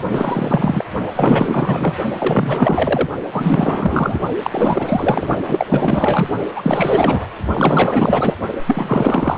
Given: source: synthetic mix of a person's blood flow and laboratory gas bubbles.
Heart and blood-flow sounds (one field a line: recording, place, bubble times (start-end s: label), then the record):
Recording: Doppler ultrasound of blood flow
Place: precordium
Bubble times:
0.00-0.04 s: bubbles
0.11-0.85 s: bubbles
1.15-1.97 s: bubbles
2.18-3.09 s: bubbles
3.31-4.21 s: bubbles
4.44-5.28 s: bubbles
5.47-5.67 s: bubbles
5.69-6.29 s: bubbles
6.56-7.28 s: bubbles
7.53-8.36 s: bubbles
8.67-9.37 s: bubbles
From the record:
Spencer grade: 4 (maximum detectable bubble signal sounding continuously throughout systole and diastole of every cardiac period, and overriding the amplitude of the normal cardiac signals)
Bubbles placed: only in the low amplitude regions of the cardiac cycle